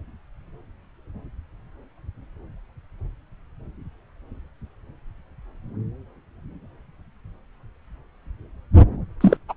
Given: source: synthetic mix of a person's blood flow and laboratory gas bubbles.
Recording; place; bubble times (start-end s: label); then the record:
Doppler ultrasound of blood flow; subclavian vein
9.21-9.37 s: bubbles
9.49-9.54 s: bubbles
From the record:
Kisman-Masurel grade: 113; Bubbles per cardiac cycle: 1 to 2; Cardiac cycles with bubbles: 1 to 10%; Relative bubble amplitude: loud (0.450 to 0.775); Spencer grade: 1 (occasional bubble signal discernible with the cardiac motion signal, with majority of cardiac periods free of bubbles); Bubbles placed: anywhere in the cardiac cycle